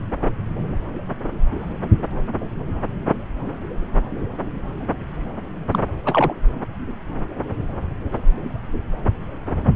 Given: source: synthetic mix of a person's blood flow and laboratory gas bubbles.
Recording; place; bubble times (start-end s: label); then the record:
Doppler ultrasound of blood flow; subclavian vein
5.71-5.79 s: bubbles
6.05-6.34 s: bubbles
From the record:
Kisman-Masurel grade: 213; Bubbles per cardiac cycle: several, 3 to 8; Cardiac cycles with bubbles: 1 to 10%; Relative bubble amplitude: loud (0.450 to 0.775); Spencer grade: 1 (occasional bubble signal discernible with the cardiac motion signal, with majority of cardiac periods free of bubbles); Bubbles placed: anywhere in the cardiac cycle